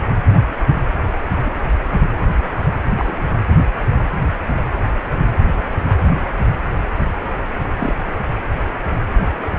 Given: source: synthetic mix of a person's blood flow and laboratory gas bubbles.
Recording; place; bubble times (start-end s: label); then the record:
Doppler ultrasound of blood flow; precordium
1.45-1.51 s: bubbles
2.97-3.25 s: bubbles
7.79-7.96 s: bubbles
From the record:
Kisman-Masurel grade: 122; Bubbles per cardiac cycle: 1 to 2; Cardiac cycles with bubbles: 10 to 50%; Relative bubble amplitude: moderate (0.250 to 0.450); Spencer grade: 2 (many but less than half of the cardiac periods contain bubble signals, singularly or in groups); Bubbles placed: anywhere in the cardiac cycle